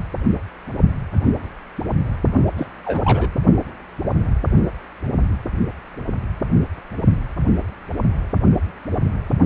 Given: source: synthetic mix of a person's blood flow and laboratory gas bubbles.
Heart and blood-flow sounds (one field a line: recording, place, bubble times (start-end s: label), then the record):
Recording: Doppler ultrasound of blood flow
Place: precordium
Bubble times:
2.57-2.67 s: bubbles
2.85-3.29 s: bubbles
From the record:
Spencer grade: 2 (many but less than half of the cardiac periods contain bubble signals, singularly or in groups)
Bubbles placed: only in the low amplitude regions of the cardiac cycle